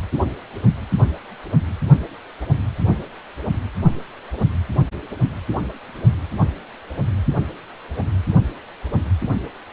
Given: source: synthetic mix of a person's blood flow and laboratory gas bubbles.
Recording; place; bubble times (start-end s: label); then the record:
Doppler ultrasound of blood flow; precordium
no bubbles
From the record:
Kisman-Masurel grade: 000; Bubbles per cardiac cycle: 0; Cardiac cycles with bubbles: 0%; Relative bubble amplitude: no bubbles discernible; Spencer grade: 0 (complete lack of bubble signals)